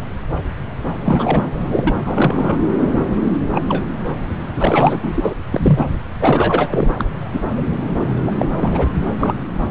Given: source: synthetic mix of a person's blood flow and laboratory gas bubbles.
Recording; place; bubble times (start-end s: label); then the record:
Doppler ultrasound of blood flow; subclavian vein
1.04-1.45 s: bubbles
1.69-1.94 s: bubbles
2.04-2.56 s: bubbles
3.51-3.62 s: bubbles
3.69-3.85 s: bubbles
4.56-4.99 s: bubbles
5.03-5.35 s: bubbles
5.52-5.96 s: bubbles
6.21-6.96 s: bubbles
6.98-7.06 s: bubbles
7.33-7.43 s: bubbles
7.57-7.62 s: bubbles
8.27-8.88 s: bubbles
8.97-9.44 s: bubbles
From the record:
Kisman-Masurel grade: 233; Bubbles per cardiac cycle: several, 3 to 8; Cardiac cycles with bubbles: 50 to 99%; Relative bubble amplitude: loud (0.450 to 0.775); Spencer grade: 3 (all of the cardiac periods contain showers or single bubble signals, but not dominating or overriding the cardiac motion signals); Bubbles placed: anywhere in the cardiac cycle